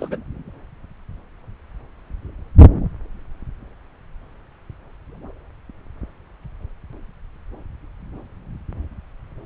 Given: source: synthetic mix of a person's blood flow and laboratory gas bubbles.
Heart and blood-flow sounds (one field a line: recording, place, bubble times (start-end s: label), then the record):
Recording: Doppler ultrasound of blood flow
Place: subclavian vein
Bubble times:
0.00-0.21 s: bubbles
From the record:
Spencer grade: 1 (occasional bubble signal discernible with the cardiac motion signal, with majority of cardiac periods free of bubbles)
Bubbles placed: anywhere in the cardiac cycle